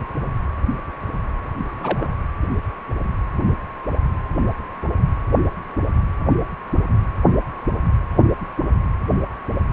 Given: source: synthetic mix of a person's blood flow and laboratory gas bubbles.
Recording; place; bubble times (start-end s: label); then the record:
Doppler ultrasound of blood flow; precordium
1.57-2.12 s: bubbles
From the record:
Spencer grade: 1 (occasional bubble signal discernible with the cardiac motion signal, with majority of cardiac periods free of bubbles); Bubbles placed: anywhere in the cardiac cycle